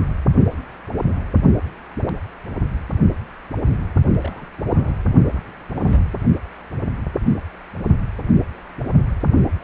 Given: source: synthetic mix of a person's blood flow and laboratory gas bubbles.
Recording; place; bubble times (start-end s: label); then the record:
Doppler ultrasound of blood flow; precordium
0.00-0.06 s: bubbles
4.19-4.46 s: bubbles
4.58-4.61 s: bubbles
4.71-4.93 s: bubbles
5.32-5.40 s: bubbles
5.75-6.00 s: bubbles
From the record:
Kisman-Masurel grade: 221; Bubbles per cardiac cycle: several, 3 to 8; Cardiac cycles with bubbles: 10 to 50%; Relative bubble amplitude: barely perceptible (0.100 to 0.250); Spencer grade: 2 (many but less than half of the cardiac periods contain bubble signals, singularly or in groups); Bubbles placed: only in the low amplitude regions of the cardiac cycle